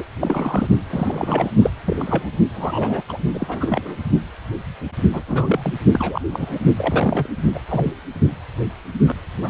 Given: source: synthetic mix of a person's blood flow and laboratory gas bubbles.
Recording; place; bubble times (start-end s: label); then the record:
Doppler ultrasound of blood flow; precordium
0.00-0.03 s: bubbles
0.21-0.68 s: bubbles
0.90-1.51 s: bubbles
1.61-1.71 s: bubbles
1.85-2.35 s: bubbles
2.54-3.02 s: bubbles
3.08-3.17 s: bubbles
3.33-3.97 s: bubbles
5.13-5.74 s: bubbles
5.92-6.21 s: bubbles
6.30-6.60 s: bubbles
6.78-7.28 s: bubbles
7.54-7.60 s: bubbles
7.69-7.92 s: bubbles
9.04-9.17 s: bubbles
9.41-9.49 s: bubbles
From the record:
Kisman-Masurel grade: 232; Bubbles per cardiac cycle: several, 3 to 8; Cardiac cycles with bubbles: 50 to 99%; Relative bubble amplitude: moderate (0.250 to 0.450); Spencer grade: 3 (all of the cardiac periods contain showers or single bubble signals, but not dominating or overriding the cardiac motion signals); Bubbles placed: only in the low amplitude regions of the cardiac cycle